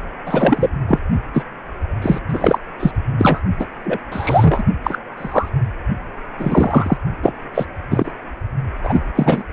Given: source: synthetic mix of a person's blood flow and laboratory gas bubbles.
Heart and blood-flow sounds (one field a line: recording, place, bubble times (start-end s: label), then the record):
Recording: Doppler ultrasound of blood flow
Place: precordium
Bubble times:
0.26-0.70 s: bubbles
0.88-0.99 s: bubbles
1.33-1.42 s: bubbles
2.02-2.19 s: bubbles
2.28-2.59 s: bubbles
2.79-2.91 s: bubbles
3.18-3.41 s: bubbles
3.59-3.66 s: bubbles
3.83-3.98 s: bubbles
4.12-4.64 s: bubbles
4.83-4.99 s: bubbles
5.17-5.49 s: bubbles
6.38-6.97 s: bubbles
7.23-7.33 s: bubbles
7.54-7.66 s: bubbles
7.90-8.12 s: bubbles
8.83-9.04 s: bubbles
9.15-9.44 s: bubbles
From the record:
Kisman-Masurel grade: 233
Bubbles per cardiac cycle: several, 3 to 8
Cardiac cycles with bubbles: 50 to 99%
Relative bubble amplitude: loud (0.450 to 0.775)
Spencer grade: 3 (all of the cardiac periods contain showers or single bubble signals, but not dominating or overriding the cardiac motion signals)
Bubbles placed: only in the low amplitude regions of the cardiac cycle